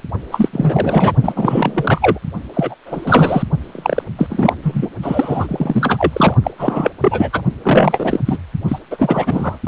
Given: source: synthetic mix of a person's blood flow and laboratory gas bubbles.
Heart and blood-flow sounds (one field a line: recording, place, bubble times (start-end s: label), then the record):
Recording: Doppler ultrasound of blood flow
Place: precordium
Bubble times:
0.32-0.49 s: bubbles
0.52-1.13 s: bubbles
1.23-2.19 s: bubbles
2.53-2.74 s: bubbles
2.85-3.43 s: bubbles
3.61-4.04 s: bubbles
4.18-4.53 s: bubbles
4.62-4.91 s: bubbles
5.02-6.35 s: bubbles
6.44-6.52 s: bubbles
6.58-6.91 s: bubbles
7.01-7.42 s: bubbles
7.63-8.20 s: bubbles
8.26-8.38 s: bubbles
8.68-8.79 s: bubbles
8.91-9.59 s: bubbles
9.63-9.67 s: bubbles
From the record:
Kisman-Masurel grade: 343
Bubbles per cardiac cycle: rolling drumbeat, 9 or more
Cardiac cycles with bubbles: 100%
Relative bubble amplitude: loud (0.450 to 0.775)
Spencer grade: 3 (all of the cardiac periods contain showers or single bubble signals, but not dominating or overriding the cardiac motion signals)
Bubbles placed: only in the low amplitude regions of the cardiac cycle